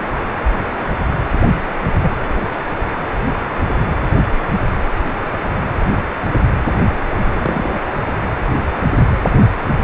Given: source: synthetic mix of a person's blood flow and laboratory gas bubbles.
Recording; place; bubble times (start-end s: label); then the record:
Doppler ultrasound of blood flow; precordium
2.02-2.16 s: bubbles
5.84-5.94 s: bubbles
7.33-7.81 s: bubbles
From the record:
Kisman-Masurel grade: 122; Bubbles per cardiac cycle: 1 to 2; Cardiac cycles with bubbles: 10 to 50%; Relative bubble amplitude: moderate (0.250 to 0.450); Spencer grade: 2 (many but less than half of the cardiac periods contain bubble signals, singularly or in groups); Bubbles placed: anywhere in the cardiac cycle